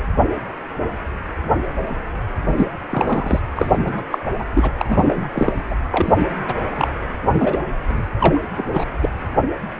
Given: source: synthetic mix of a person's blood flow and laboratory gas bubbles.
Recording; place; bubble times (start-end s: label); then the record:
Doppler ultrasound of blood flow; precordium
2.57-2.71 s: bubbles
2.90-3.40 s: bubbles
3.56-4.02 s: bubbles
4.11-4.18 s: bubbles
4.38-4.45 s: bubbles
4.54-4.71 s: bubbles
4.78-4.86 s: bubbles
4.89-5.28 s: bubbles
5.32-5.53 s: bubbles
5.71-5.75 s: bubbles
5.92-6.28 s: bubbles
6.48-6.54 s: bubbles
6.76-6.88 s: bubbles
7.32-7.63 s: bubbles
7.88-8.04 s: bubbles
8.20-8.40 s: bubbles
8.57-8.64 s: bubbles
8.73-8.85 s: bubbles
9.01-9.09 s: bubbles
From the record:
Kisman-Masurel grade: 233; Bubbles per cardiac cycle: several, 3 to 8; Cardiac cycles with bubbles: 50 to 99%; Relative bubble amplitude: loud (0.450 to 0.775); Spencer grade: 3 (all of the cardiac periods contain showers or single bubble signals, but not dominating or overriding the cardiac motion signals); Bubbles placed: anywhere in the cardiac cycle